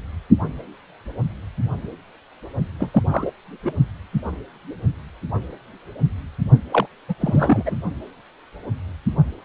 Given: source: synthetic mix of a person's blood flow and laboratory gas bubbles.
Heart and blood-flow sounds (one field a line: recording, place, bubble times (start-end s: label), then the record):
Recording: Doppler ultrasound of blood flow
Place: precordium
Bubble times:
2.79-3.02 s: bubbles
3.10-3.31 s: bubbles
3.63-3.73 s: bubbles
6.71-6.86 s: bubbles
7.08-7.14 s: bubbles
7.21-7.75 s: bubbles
From the record:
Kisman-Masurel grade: 222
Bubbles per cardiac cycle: several, 3 to 8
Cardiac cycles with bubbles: 10 to 50%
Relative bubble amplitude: moderate (0.250 to 0.450)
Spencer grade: 2 (many but less than half of the cardiac periods contain bubble signals, singularly or in groups)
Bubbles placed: only in the low amplitude regions of the cardiac cycle